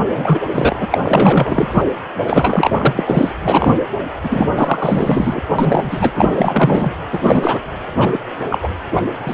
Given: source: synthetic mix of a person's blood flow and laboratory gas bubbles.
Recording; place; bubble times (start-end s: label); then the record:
Doppler ultrasound of blood flow; precordium
0.13-0.40 s: bubbles
0.51-0.87 s: bubbles
0.91-0.98 s: bubbles
1.02-1.83 s: bubbles
2.27-3.33 s: bubbles
3.42-3.77 s: bubbles
4.23-4.47 s: bubbles
4.56-5.42 s: bubbles
5.58-6.10 s: bubbles
6.16-6.92 s: bubbles
7.12-7.60 s: bubbles
7.95-8.18 s: bubbles
8.49-8.58 s: bubbles
8.62-8.69 s: bubbles
8.94-9.01 s: bubbles
9.23-9.33 s: bubbles
From the record:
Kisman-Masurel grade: 444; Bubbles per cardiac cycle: continuous sound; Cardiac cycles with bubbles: 100%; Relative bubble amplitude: maximal (0.775 to 0.999); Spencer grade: 4 (maximum detectable bubble signal sounding continuously throughout systole and diastole of every cardiac period, and overriding the amplitude of the normal cardiac signals); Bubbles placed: anywhere in the cardiac cycle